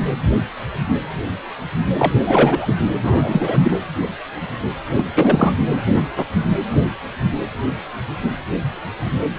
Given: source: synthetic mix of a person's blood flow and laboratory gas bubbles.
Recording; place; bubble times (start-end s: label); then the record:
Doppler ultrasound of blood flow; precordium
1.98-2.13 s: bubbles
2.19-2.73 s: bubbles
3.02-3.79 s: bubbles
4.96-5.04 s: bubbles
5.14-5.55 s: bubbles
From the record:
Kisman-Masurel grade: 223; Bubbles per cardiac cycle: several, 3 to 8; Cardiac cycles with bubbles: 10 to 50%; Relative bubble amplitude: loud (0.450 to 0.775); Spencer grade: 2 (many but less than half of the cardiac periods contain bubble signals, singularly or in groups); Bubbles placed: anywhere in the cardiac cycle